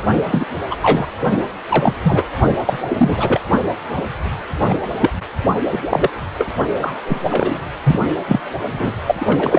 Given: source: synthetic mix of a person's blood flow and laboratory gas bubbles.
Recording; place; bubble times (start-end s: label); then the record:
Doppler ultrasound of blood flow; precordium
0.30-0.46 s: bubbles
0.71-0.76 s: bubbles
0.82-1.07 s: bubbles
1.69-1.94 s: bubbles
2.04-2.23 s: bubbles
2.65-2.79 s: bubbles
2.89-3.40 s: bubbles
3.96-4.06 s: bubbles
4.68-4.90 s: bubbles
5.00-5.10 s: bubbles
5.71-5.79 s: bubbles
5.90-6.10 s: bubbles
6.38-6.48 s: bubbles
6.80-6.94 s: bubbles
7.05-7.19 s: bubbles
7.30-7.58 s: bubbles
7.84-8.00 s: bubbles
8.28-8.40 s: bubbles
8.71-8.91 s: bubbles
9.06-9.15 s: bubbles
9.21-9.59 s: bubbles
From the record:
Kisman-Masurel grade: 243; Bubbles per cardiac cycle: several, 3 to 8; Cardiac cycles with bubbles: 100%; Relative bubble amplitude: loud (0.450 to 0.775); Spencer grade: 3 (all of the cardiac periods contain showers or single bubble signals, but not dominating or overriding the cardiac motion signals); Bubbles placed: only in the low amplitude regions of the cardiac cycle